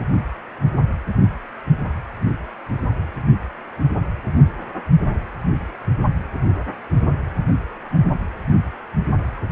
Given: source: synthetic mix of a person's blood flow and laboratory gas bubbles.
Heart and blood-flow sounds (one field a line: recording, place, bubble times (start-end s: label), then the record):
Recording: Doppler ultrasound of blood flow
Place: precordium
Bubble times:
no bubbles
From the record:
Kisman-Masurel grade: 000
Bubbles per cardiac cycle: 0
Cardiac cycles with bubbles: 0%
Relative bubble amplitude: no bubbles discernible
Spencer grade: 0 (complete lack of bubble signals)